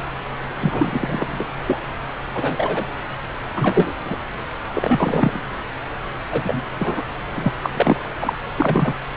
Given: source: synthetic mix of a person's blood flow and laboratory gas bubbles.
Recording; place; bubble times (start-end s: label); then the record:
Doppler ultrasound of blood flow; subclavian vein
0.60-1.45 s: bubbles
1.66-1.80 s: bubbles
2.34-2.85 s: bubbles
3.55-3.93 s: bubbles
4.05-4.16 s: bubbles
4.75-5.40 s: bubbles
6.32-6.63 s: bubbles
6.79-7.03 s: bubbles
7.36-7.52 s: bubbles
7.63-7.71 s: bubbles
7.74-8.03 s: bubbles
8.20-8.33 s: bubbles
8.57-8.96 s: bubbles
From the record:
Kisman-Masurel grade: 233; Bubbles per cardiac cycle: several, 3 to 8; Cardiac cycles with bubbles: 50 to 99%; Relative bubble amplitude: loud (0.450 to 0.775); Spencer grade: 3 (all of the cardiac periods contain showers or single bubble signals, but not dominating or overriding the cardiac motion signals); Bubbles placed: anywhere in the cardiac cycle